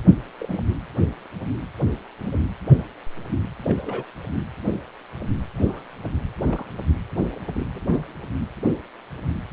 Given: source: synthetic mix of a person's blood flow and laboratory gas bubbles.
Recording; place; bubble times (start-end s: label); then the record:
Doppler ultrasound of blood flow; precordium
0.39-0.60 s: bubbles
2.19-2.38 s: bubbles
3.64-4.05 s: bubbles
5.57-5.83 s: bubbles
6.44-6.66 s: bubbles
7.55-7.66 s: bubbles
7.73-8.12 s: bubbles
From the record:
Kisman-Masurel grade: 121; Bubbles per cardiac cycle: 1 to 2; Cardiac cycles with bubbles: 10 to 50%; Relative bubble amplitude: barely perceptible (0.100 to 0.250); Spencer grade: 2 (many but less than half of the cardiac periods contain bubble signals, singularly or in groups); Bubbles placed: anywhere in the cardiac cycle